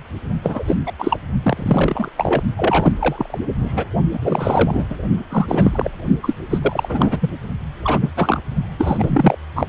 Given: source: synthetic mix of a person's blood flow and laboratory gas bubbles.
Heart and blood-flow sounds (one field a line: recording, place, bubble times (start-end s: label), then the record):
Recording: Doppler ultrasound of blood flow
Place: precordium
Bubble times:
0.43-0.64 s: bubbles
0.67-0.75 s: bubbles
0.86-0.92 s: bubbles
0.99-1.20 s: bubbles
1.43-2.08 s: bubbles
2.17-2.42 s: bubbles
2.57-2.92 s: bubbles
2.99-3.38 s: bubbles
3.58-3.84 s: bubbles
4.13-4.19 s: bubbles
4.21-4.86 s: bubbles
4.89-4.96 s: bubbles
5.29-5.89 s: bubbles
6.22-6.34 s: bubbles
6.50-7.30 s: bubbles
7.83-8.10 s: bubbles
8.16-8.40 s: bubbles
8.78-9.36 s: bubbles
9.55-9.67 s: bubbles
From the record:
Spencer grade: 3 (all of the cardiac periods contain showers or single bubble signals, but not dominating or overriding the cardiac motion signals)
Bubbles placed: only in the low amplitude regions of the cardiac cycle